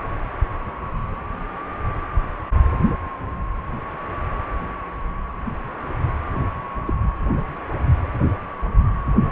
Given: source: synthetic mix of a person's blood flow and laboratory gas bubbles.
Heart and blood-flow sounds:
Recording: Doppler ultrasound of blood flow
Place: precordium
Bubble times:
6.87-6.93 s: bubbles
From the record:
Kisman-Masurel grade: 121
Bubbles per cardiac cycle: 1 to 2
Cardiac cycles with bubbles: 10 to 50%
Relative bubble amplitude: barely perceptible (0.100 to 0.250)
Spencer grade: 2 (many but less than half of the cardiac periods contain bubble signals, singularly or in groups)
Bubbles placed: anywhere in the cardiac cycle

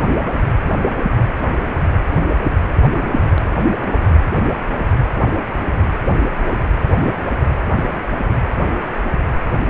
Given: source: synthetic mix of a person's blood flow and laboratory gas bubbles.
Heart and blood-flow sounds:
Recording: Doppler ultrasound of blood flow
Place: precordium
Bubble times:
no bubbles
From the record:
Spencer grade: 0 (complete lack of bubble signals)

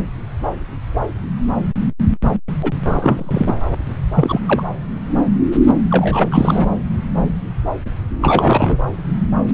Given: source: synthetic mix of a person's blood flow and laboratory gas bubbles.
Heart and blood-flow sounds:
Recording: Doppler ultrasound of blood flow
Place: subclavian vein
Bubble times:
2.62-2.71 s: bubbles
2.85-3.55 s: bubbles
3.87-3.90 s: bubbles
4.15-4.40 s: bubbles
4.46-4.63 s: bubbles
5.90-6.68 s: bubbles
8.10-8.78 s: bubbles
From the record:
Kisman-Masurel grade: 233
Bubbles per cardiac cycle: several, 3 to 8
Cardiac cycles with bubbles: 50 to 99%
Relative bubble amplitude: loud (0.450 to 0.775)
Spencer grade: 3 (all of the cardiac periods contain showers or single bubble signals, but not dominating or overriding the cardiac motion signals)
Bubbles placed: anywhere in the cardiac cycle

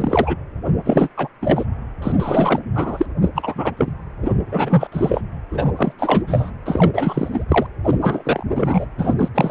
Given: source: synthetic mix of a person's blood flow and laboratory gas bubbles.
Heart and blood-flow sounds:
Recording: Doppler ultrasound of blood flow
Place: precordium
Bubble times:
0.00-0.35 s: bubbles
0.84-1.08 s: bubbles
1.17-1.28 s: bubbles
1.42-1.65 s: bubbles
2.02-2.12 s: bubbles
2.20-2.59 s: bubbles
2.74-3.06 s: bubbles
3.21-3.29 s: bubbles
3.35-3.72 s: bubbles
3.77-3.92 s: bubbles
4.22-4.32 s: bubbles
4.46-4.87 s: bubbles
4.92-5.21 s: bubbles
5.52-5.73 s: bubbles
5.77-5.92 s: bubbles
5.99-6.23 s: bubbles
6.27-6.50 s: bubbles
6.66-7.46 s: bubbles
7.48-7.67 s: bubbles
7.84-8.43 s: bubbles
8.54-8.86 s: bubbles
8.98-9.14 s: bubbles
9.18-9.29 s: bubbles
9.34-9.51 s: bubbles
From the record:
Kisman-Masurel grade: 343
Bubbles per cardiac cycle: rolling drumbeat, 9 or more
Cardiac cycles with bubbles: 100%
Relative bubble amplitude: loud (0.450 to 0.775)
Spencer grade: 3 (all of the cardiac periods contain showers or single bubble signals, but not dominating or overriding the cardiac motion signals)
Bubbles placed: anywhere in the cardiac cycle

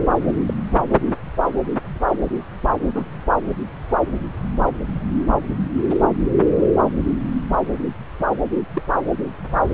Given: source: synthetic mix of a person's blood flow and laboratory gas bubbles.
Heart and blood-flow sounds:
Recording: Doppler ultrasound of blood flow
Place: subclavian vein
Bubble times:
0.27-0.33 s: bubbles
0.47-0.54 s: bubbles
2.95-3.05 s: bubbles
5.88-6.02 s: bubbles
8.73-8.82 s: bubbles
From the record:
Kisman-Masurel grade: 122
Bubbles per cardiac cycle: 1 to 2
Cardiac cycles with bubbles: 10 to 50%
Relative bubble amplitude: moderate (0.250 to 0.450)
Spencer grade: 2 (many but less than half of the cardiac periods contain bubble signals, singularly or in groups)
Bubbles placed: anywhere in the cardiac cycle

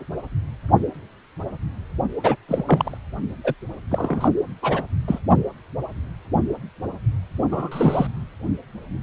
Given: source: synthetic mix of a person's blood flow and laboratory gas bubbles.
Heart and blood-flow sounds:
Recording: Doppler ultrasound of blood flow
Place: precordium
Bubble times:
2.23-2.36 s: bubbles
2.48-2.63 s: bubbles
2.66-2.97 s: bubbles
3.43-3.54 s: bubbles
3.91-4.29 s: bubbles
4.62-4.83 s: bubbles
5.08-5.19 s: bubbles
7.52-8.07 s: bubbles
From the record:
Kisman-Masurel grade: 222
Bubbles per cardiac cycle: several, 3 to 8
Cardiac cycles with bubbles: 10 to 50%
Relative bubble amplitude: moderate (0.250 to 0.450)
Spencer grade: 2 (many but less than half of the cardiac periods contain bubble signals, singularly or in groups)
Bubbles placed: only in the low amplitude regions of the cardiac cycle

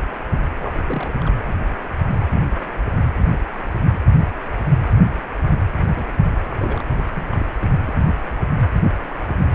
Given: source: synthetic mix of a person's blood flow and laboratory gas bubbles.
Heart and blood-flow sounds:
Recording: Doppler ultrasound of blood flow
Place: precordium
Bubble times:
0.59-1.12 s: bubbles
1.21-1.33 s: bubbles
5.94-6.08 s: bubbles
6.50-7.01 s: bubbles
7.13-7.26 s: bubbles
7.31-7.47 s: bubbles
7.61-7.67 s: bubbles
7.85-7.94 s: bubbles
From the record:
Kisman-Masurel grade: 221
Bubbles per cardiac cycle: several, 3 to 8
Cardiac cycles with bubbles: 10 to 50%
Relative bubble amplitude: barely perceptible (0.100 to 0.250)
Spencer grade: 2 (many but less than half of the cardiac periods contain bubble signals, singularly or in groups)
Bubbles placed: anywhere in the cardiac cycle

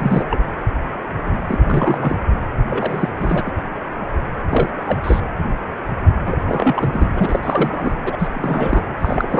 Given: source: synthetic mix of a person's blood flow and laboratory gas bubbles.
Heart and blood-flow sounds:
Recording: Doppler ultrasound of blood flow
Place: precordium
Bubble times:
0.00-0.24 s: bubbles
0.30-0.38 s: bubbles
1.47-1.58 s: bubbles
1.66-2.17 s: bubbles
2.67-3.09 s: bubbles
3.18-3.51 s: bubbles
4.50-4.73 s: bubbles
4.77-4.83 s: bubbles
4.86-5.20 s: bubbles
6.25-6.38 s: bubbles
6.46-7.05 s: bubbles
7.14-7.39 s: bubbles
7.42-7.93 s: bubbles
8.04-8.28 s: bubbles
8.33-8.83 s: bubbles
8.99-9.40 s: bubbles
From the record:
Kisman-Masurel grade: 332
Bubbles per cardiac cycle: rolling drumbeat, 9 or more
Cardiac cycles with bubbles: 50 to 99%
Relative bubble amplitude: moderate (0.250 to 0.450)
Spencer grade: 3 (all of the cardiac periods contain showers or single bubble signals, but not dominating or overriding the cardiac motion signals)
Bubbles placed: anywhere in the cardiac cycle

